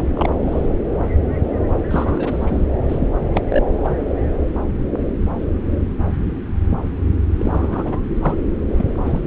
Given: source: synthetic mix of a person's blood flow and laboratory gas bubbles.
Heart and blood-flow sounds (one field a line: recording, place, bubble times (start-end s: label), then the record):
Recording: Doppler ultrasound of blood flow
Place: subclavian vein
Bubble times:
0.00-0.06 s: bubbles
0.14-0.69 s: bubbles
1.91-2.66 s: bubbles
2.88-3.07 s: bubbles
3.34-3.42 s: bubbles
3.48-3.64 s: bubbles
3.84-3.94 s: bubbles
7.39-7.97 s: bubbles
8.21-8.35 s: bubbles
8.77-8.85 s: bubbles
9.04-9.21 s: bubbles
From the record:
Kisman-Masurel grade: 232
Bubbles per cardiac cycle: several, 3 to 8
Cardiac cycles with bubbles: 50 to 99%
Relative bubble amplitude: moderate (0.250 to 0.450)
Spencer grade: 3 (all of the cardiac periods contain showers or single bubble signals, but not dominating or overriding the cardiac motion signals)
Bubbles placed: anywhere in the cardiac cycle